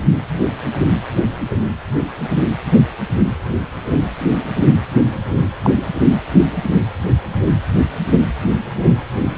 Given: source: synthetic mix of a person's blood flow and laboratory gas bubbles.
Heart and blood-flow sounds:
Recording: Doppler ultrasound of blood flow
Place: precordium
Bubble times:
5.62-5.71 s: bubbles
From the record:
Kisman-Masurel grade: 113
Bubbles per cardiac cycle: 1 to 2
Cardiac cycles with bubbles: 1 to 10%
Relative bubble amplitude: loud (0.450 to 0.775)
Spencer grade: 1 (occasional bubble signal discernible with the cardiac motion signal, with majority of cardiac periods free of bubbles)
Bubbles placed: anywhere in the cardiac cycle

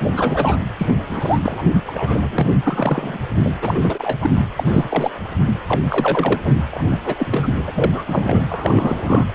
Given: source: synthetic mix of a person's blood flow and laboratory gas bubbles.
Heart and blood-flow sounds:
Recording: Doppler ultrasound of blood flow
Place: precordium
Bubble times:
0.12-0.57 s: bubbles
0.78-0.95 s: bubbles
1.08-1.40 s: bubbles
1.45-1.66 s: bubbles
1.74-1.82 s: bubbles
1.87-2.29 s: bubbles
2.31-2.49 s: bubbles
2.64-3.17 s: bubbles
3.45-3.50 s: bubbles
3.62-4.18 s: bubbles
4.21-4.30 s: bubbles
4.58-4.63 s: bubbles
4.66-5.10 s: bubbles
5.67-5.81 s: bubbles
5.88-6.41 s: bubbles
6.44-6.54 s: bubbles
6.71-6.83 s: bubbles
6.90-6.99 s: bubbles
7.05-7.65 s: bubbles
7.67-8.03 s: bubbles
8.07-8.40 s: bubbles
8.48-9.26 s: bubbles
From the record:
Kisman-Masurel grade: 342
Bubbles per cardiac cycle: rolling drumbeat, 9 or more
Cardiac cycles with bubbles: 100%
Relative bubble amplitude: moderate (0.250 to 0.450)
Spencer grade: 3 (all of the cardiac periods contain showers or single bubble signals, but not dominating or overriding the cardiac motion signals)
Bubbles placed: anywhere in the cardiac cycle

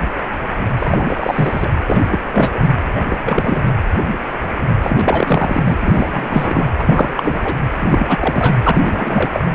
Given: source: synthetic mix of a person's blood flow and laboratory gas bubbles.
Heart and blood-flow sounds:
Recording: Doppler ultrasound of blood flow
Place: precordium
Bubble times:
0.78-1.69 s: bubbles
1.86-2.21 s: bubbles
2.32-2.68 s: bubbles
2.88-2.90 s: bubbles
2.95-3.05 s: bubbles
3.09-3.62 s: bubbles
4.82-5.75 s: bubbles
5.80-6.68 s: bubbles
6.79-7.12 s: bubbles
7.17-7.55 s: bubbles
7.76-8.56 s: bubbles
8.63-9.45 s: bubbles
From the record:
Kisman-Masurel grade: 333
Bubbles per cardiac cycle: rolling drumbeat, 9 or more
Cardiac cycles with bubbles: 50 to 99%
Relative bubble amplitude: loud (0.450 to 0.775)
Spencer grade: 3 (all of the cardiac periods contain showers or single bubble signals, but not dominating or overriding the cardiac motion signals)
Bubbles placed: anywhere in the cardiac cycle

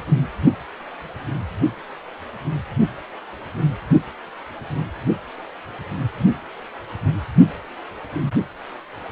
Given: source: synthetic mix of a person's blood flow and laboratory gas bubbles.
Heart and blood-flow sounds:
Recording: Doppler ultrasound of blood flow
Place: precordium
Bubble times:
no bubbles
From the record:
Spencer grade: 0 (complete lack of bubble signals)

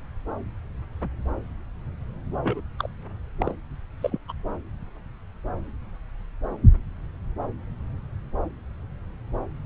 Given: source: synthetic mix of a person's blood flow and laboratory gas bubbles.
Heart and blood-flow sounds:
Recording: Doppler ultrasound of blood flow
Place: subclavian vein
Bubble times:
2.43-2.61 s: bubbles
2.79-2.88 s: bubbles
3.39-3.54 s: bubbles
4.01-4.19 s: bubbles
4.28-4.32 s: bubbles
From the record:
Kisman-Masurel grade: 222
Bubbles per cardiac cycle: several, 3 to 8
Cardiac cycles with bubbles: 10 to 50%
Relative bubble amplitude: moderate (0.250 to 0.450)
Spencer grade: 2 (many but less than half of the cardiac periods contain bubble signals, singularly or in groups)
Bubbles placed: anywhere in the cardiac cycle

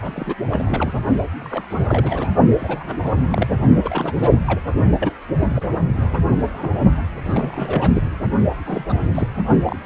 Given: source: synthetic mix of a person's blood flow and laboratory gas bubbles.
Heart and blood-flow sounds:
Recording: Doppler ultrasound of blood flow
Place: precordium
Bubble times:
0.01-0.35 s: bubbles
0.51-0.93 s: bubbles
1.40-1.67 s: bubbles
1.70-2.35 s: bubbles
2.59-3.47 s: bubbles
3.82-4.12 s: bubbles
4.15-4.40 s: bubbles
4.46-4.61 s: bubbles
5.00-5.11 s: bubbles
5.39-5.47 s: bubbles
5.54-5.68 s: bubbles
6.13-6.17 s: bubbles
6.27-6.36 s: bubbles
6.54-6.78 s: bubbles
7.25-8.04 s: bubbles
8.65-9.29 s: bubbles
9.62-9.79 s: bubbles
From the record:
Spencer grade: 3 (all of the cardiac periods contain showers or single bubble signals, but not dominating or overriding the cardiac motion signals)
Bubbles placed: only in the low amplitude regions of the cardiac cycle

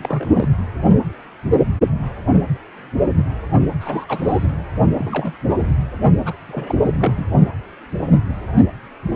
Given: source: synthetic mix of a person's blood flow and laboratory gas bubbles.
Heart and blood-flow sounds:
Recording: Doppler ultrasound of blood flow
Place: precordium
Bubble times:
0.00-0.52 s: bubbles
3.80-4.48 s: bubbles
4.96-5.38 s: bubbles
5.49-5.74 s: bubbles
6.25-6.33 s: bubbles
6.48-6.78 s: bubbles
6.82-7.27 s: bubbles
From the record:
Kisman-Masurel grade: 221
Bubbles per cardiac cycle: several, 3 to 8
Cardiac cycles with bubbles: 10 to 50%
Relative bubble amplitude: barely perceptible (0.100 to 0.250)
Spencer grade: 2 (many but less than half of the cardiac periods contain bubble signals, singularly or in groups)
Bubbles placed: only in the low amplitude regions of the cardiac cycle

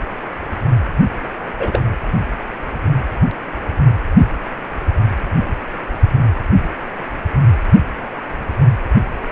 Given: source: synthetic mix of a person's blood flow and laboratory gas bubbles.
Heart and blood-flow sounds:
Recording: Doppler ultrasound of blood flow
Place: precordium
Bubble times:
1.58-1.81 s: bubbles
From the record:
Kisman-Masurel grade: 112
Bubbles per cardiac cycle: 1 to 2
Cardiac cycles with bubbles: 1 to 10%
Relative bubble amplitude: moderate (0.250 to 0.450)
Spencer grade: 1 (occasional bubble signal discernible with the cardiac motion signal, with majority of cardiac periods free of bubbles)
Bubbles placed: anywhere in the cardiac cycle

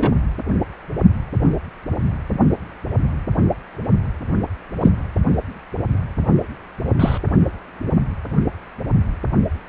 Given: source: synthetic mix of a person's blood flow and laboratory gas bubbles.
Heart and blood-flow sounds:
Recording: Doppler ultrasound of blood flow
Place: precordium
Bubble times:
0.00-0.12 s: bubbles
4.82-4.91 s: bubbles
6.99-7.18 s: bubbles
From the record:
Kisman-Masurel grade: 123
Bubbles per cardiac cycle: 1 to 2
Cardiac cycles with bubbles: 10 to 50%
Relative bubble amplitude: loud (0.450 to 0.775)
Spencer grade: 2 (many but less than half of the cardiac periods contain bubble signals, singularly or in groups)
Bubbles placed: only in the low amplitude regions of the cardiac cycle

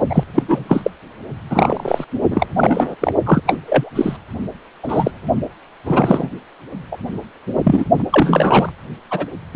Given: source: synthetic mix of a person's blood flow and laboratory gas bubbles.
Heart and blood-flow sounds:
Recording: Doppler ultrasound of blood flow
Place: precordium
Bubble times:
0.09-0.23 s: bubbles
0.35-0.42 s: bubbles
0.48-0.65 s: bubbles
0.69-0.91 s: bubbles
1.50-2.04 s: bubbles
2.31-2.46 s: bubbles
2.56-2.96 s: bubbles
3.00-3.12 s: bubbles
3.26-3.41 s: bubbles
3.46-3.57 s: bubbles
3.66-3.90 s: bubbles
3.95-4.17 s: bubbles
4.83-5.11 s: bubbles
5.87-6.29 s: bubbles
6.91-6.97 s: bubbles
7.64-7.85 s: bubbles
7.98-8.04 s: bubbles
8.10-8.71 s: bubbles
9.10-9.26 s: bubbles
9.53-9.55 s: bubbles
From the record:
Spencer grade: 3 (all of the cardiac periods contain showers or single bubble signals, but not dominating or overriding the cardiac motion signals)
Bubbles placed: only in the low amplitude regions of the cardiac cycle

